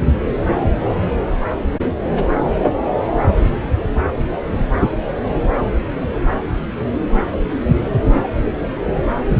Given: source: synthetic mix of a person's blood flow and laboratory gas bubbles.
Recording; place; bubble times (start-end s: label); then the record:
Doppler ultrasound of blood flow; subclavian vein
7.10-7.37 s: bubbles
From the record:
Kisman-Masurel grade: 211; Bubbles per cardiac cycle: several, 3 to 8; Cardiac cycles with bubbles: 1 to 10%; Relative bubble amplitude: barely perceptible (0.100 to 0.250); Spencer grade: 1 (occasional bubble signal discernible with the cardiac motion signal, with majority of cardiac periods free of bubbles); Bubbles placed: anywhere in the cardiac cycle